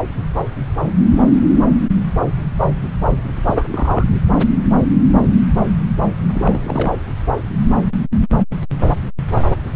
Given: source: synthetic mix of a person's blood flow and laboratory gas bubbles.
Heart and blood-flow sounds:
Doppler ultrasound of blood flow; subclavian vein
3.46-3.65 s: bubbles
3.71-4.04 s: bubbles
6.35-6.98 s: bubbles
From the record:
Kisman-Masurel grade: 222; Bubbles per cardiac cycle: several, 3 to 8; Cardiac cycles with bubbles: 10 to 50%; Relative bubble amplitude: moderate (0.250 to 0.450); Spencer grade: 2 (many but less than half of the cardiac periods contain bubble signals, singularly or in groups); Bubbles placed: anywhere in the cardiac cycle

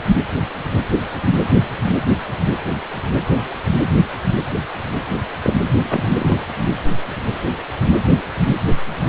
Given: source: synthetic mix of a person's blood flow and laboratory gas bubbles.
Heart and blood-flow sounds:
Doppler ultrasound of blood flow; precordium
5.42-5.54 s: bubbles
5.88-6.38 s: bubbles
From the record:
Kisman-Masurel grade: 212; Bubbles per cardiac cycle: several, 3 to 8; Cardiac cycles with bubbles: 1 to 10%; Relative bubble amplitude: moderate (0.250 to 0.450); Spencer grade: 1 (occasional bubble signal discernible with the cardiac motion signal, with majority of cardiac periods free of bubbles); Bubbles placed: anywhere in the cardiac cycle

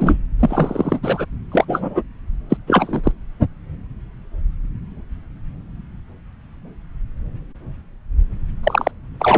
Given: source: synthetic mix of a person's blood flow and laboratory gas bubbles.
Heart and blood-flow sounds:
Doppler ultrasound of blood flow; subclavian vein
0.00-0.18 s: bubbles
0.40-0.99 s: bubbles
1.03-1.26 s: bubbles
1.52-2.02 s: bubbles
2.49-2.57 s: bubbles
2.67-3.01 s: bubbles
3.04-3.12 s: bubbles
8.63-8.91 s: bubbles
9.20-9.38 s: bubbles
From the record:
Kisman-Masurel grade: 233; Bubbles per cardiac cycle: several, 3 to 8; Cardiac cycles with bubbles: 50 to 99%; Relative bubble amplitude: loud (0.450 to 0.775); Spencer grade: 3 (all of the cardiac periods contain showers or single bubble signals, but not dominating or overriding the cardiac motion signals); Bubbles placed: anywhere in the cardiac cycle

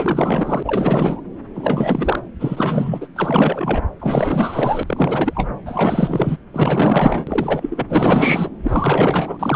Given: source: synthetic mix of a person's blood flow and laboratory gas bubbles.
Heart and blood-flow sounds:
Doppler ultrasound of blood flow; subclavian vein
0.00-1.21 s: bubbles
1.54-2.20 s: bubbles
2.40-3.08 s: bubbles
3.15-3.85 s: bubbles
3.99-4.84 s: bubbles
4.87-5.50 s: bubbles
5.66-6.38 s: bubbles
6.53-7.85 s: bubbles
7.88-8.50 s: bubbles
8.63-9.56 s: bubbles
From the record:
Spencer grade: 4 (maximum detectable bubble signal sounding continuously throughout systole and diastole of every cardiac period, and overriding the amplitude of the normal cardiac signals); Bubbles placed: anywhere in the cardiac cycle

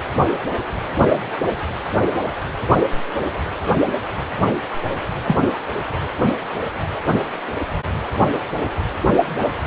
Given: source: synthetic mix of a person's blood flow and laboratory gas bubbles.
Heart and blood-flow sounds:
Doppler ultrasound of blood flow; precordium
5.23-5.39 s: bubbles
From the record:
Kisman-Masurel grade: 113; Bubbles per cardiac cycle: 1 to 2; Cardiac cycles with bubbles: 1 to 10%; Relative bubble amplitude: loud (0.450 to 0.775); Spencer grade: 1 (occasional bubble signal discernible with the cardiac motion signal, with majority of cardiac periods free of bubbles); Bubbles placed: anywhere in the cardiac cycle

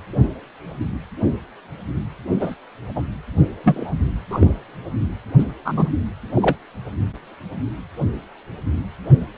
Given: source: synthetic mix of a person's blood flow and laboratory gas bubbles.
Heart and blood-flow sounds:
Doppler ultrasound of blood flow; precordium
2.40-2.55 s: bubbles
2.96-3.02 s: bubbles
3.63-3.93 s: bubbles
4.30-4.54 s: bubbles
5.38-5.45 s: bubbles
5.65-5.91 s: bubbles
6.35-6.56 s: bubbles
From the record:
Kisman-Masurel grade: 123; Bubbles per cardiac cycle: 1 to 2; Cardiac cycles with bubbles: 10 to 50%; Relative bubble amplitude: loud (0.450 to 0.775); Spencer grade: 2 (many but less than half of the cardiac periods contain bubble signals, singularly or in groups); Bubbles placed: anywhere in the cardiac cycle

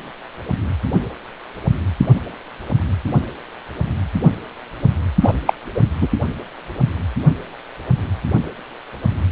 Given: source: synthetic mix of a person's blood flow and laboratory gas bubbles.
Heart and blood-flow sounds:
Doppler ultrasound of blood flow; precordium
5.21-5.33 s: bubbles
5.46-5.54 s: bubbles
5.75-5.81 s: bubbles
6.01-6.08 s: bubbles
From the record:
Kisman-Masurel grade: 223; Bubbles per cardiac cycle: several, 3 to 8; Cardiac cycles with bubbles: 10 to 50%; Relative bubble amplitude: loud (0.450 to 0.775); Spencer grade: 2 (many but less than half of the cardiac periods contain bubble signals, singularly or in groups); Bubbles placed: anywhere in the cardiac cycle

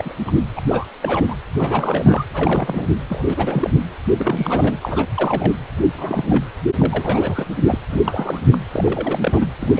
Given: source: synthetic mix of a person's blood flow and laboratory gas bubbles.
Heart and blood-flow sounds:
Doppler ultrasound of blood flow; precordium
0.00-0.14 s: bubbles
0.27-0.32 s: bubbles
0.56-0.61 s: bubbles
0.68-0.88 s: bubbles
1.01-1.35 s: bubbles
1.57-2.25 s: bubbles
2.33-2.87 s: bubbles
3.08-3.24 s: bubbles
3.28-3.73 s: bubbles
4.17-5.05 s: bubbles
5.15-5.53 s: bubbles
5.94-6.47 s: bubbles
6.79-7.45 s: bubbles
7.67-7.79 s: bubbles
7.90-8.02 s: bubbles
8.07-8.40 s: bubbles
8.52-8.59 s: bubbles
8.73-9.46 s: bubbles
9.61-9.80 s: bubbles
From the record:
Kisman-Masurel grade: 342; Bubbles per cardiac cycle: rolling drumbeat, 9 or more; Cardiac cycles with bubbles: 100%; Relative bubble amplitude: moderate (0.250 to 0.450); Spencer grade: 3 (all of the cardiac periods contain showers or single bubble signals, but not dominating or overriding the cardiac motion signals); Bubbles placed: anywhere in the cardiac cycle

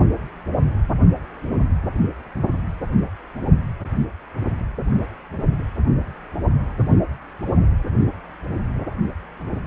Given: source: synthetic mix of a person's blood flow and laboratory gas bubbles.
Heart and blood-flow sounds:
Doppler ultrasound of blood flow; precordium
no bubbles
From the record:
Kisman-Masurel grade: 000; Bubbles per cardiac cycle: 0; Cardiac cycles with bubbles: 0%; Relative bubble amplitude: no bubbles discernible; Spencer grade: 0 (complete lack of bubble signals)

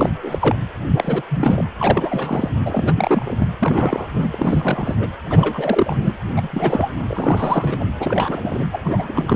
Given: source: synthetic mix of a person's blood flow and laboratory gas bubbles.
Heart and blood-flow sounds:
Doppler ultrasound of blood flow; precordium
0.00-0.10 s: bubbles
0.22-0.56 s: bubbles
0.87-1.23 s: bubbles
1.30-1.65 s: bubbles
1.79-2.50 s: bubbles
2.65-3.35 s: bubbles
3.38-3.48 s: bubbles
3.58-4.07 s: bubbles
4.14-4.28 s: bubbles
4.31-4.96 s: bubbles
4.99-5.08 s: bubbles
5.30-5.98 s: bubbles
6.02-6.16 s: bubbles
6.36-6.48 s: bubbles
6.52-6.90 s: bubbles
7.07-7.85 s: bubbles
8.00-8.64 s: bubbles
8.73-8.79 s: bubbles
8.84-9.36 s: bubbles
From the record:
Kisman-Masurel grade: 342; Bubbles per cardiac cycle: rolling drumbeat, 9 or more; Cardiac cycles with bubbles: 100%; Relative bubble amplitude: moderate (0.250 to 0.450); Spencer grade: 3 (all of the cardiac periods contain showers or single bubble signals, but not dominating or overriding the cardiac motion signals); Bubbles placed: anywhere in the cardiac cycle

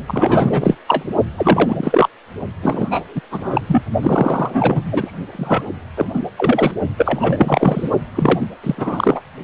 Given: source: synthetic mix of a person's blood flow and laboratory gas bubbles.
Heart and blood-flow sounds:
Doppler ultrasound of blood flow; precordium
0.07-0.78 s: bubbles
0.86-1.05 s: bubbles
1.37-2.09 s: bubbles
2.62-3.20 s: bubbles
3.31-3.62 s: bubbles
3.67-3.83 s: bubbles
4.01-5.13 s: bubbles
5.31-5.66 s: bubbles
5.97-6.06 s: bubbles
6.13-6.21 s: bubbles
6.38-6.71 s: bubbles
6.97-7.89 s: bubbles
8.15-8.47 s: bubbles
8.63-9.22 s: bubbles
From the record:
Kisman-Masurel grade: 343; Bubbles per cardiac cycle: rolling drumbeat, 9 or more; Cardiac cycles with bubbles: 100%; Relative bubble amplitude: loud (0.450 to 0.775); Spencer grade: 3 (all of the cardiac periods contain showers or single bubble signals, but not dominating or overriding the cardiac motion signals); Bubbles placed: only in the low amplitude regions of the cardiac cycle

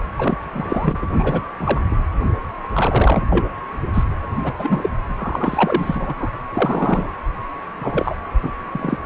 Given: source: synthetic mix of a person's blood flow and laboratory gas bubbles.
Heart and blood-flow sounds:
Doppler ultrasound of blood flow; precordium
0.18-0.38 s: bubbles
0.51-0.97 s: bubbles
1.02-1.06 s: bubbles
1.19-1.42 s: bubbles
1.59-1.81 s: bubbles
1.91-1.96 s: bubbles
2.73-3.45 s: bubbles
3.93-4.04 s: bubbles
4.44-4.54 s: bubbles
4.58-4.89 s: bubbles
5.17-6.14 s: bubbles
6.18-6.31 s: bubbles
6.54-7.09 s: bubbles
7.79-8.16 s: bubbles
8.43-8.52 s: bubbles
8.72-8.98 s: bubbles
9.03-9.06 s: bubbles
From the record:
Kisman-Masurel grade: 242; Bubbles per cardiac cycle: several, 3 to 8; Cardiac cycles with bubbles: 100%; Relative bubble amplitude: moderate (0.250 to 0.450); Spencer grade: 3 (all of the cardiac periods contain showers or single bubble signals, but not dominating or overriding the cardiac motion signals); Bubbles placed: anywhere in the cardiac cycle

